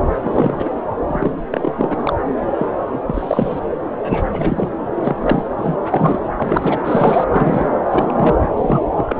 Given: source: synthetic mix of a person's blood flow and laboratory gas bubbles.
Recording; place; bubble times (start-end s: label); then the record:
Doppler ultrasound of blood flow; subclavian vein
0.24-0.69 s: bubbles
1.07-1.32 s: bubbles
1.52-1.72 s: bubbles
1.76-2.13 s: bubbles
2.58-2.66 s: bubbles
2.78-3.01 s: bubbles
3.07-3.59 s: bubbles
3.98-4.27 s: bubbles
4.31-4.69 s: bubbles
4.94-5.16 s: bubbles
5.22-5.43 s: bubbles
5.57-5.77 s: bubbles
5.90-6.19 s: bubbles
6.26-6.29 s: bubbles
6.37-6.77 s: bubbles
6.84-7.25 s: bubbles
7.30-7.69 s: bubbles
7.89-8.35 s: bubbles
8.41-8.48 s: bubbles
8.57-8.82 s: bubbles
8.92-9.16 s: bubbles
From the record:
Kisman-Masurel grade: 242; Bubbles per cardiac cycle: several, 3 to 8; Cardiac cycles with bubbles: 100%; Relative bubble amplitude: moderate (0.250 to 0.450); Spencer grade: 3 (all of the cardiac periods contain showers or single bubble signals, but not dominating or overriding the cardiac motion signals); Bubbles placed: anywhere in the cardiac cycle